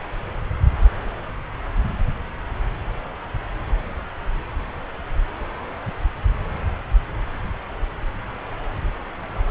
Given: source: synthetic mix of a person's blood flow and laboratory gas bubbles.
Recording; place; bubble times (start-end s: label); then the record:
Doppler ultrasound of blood flow; subclavian vein
no bubbles
From the record:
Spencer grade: 0 (complete lack of bubble signals)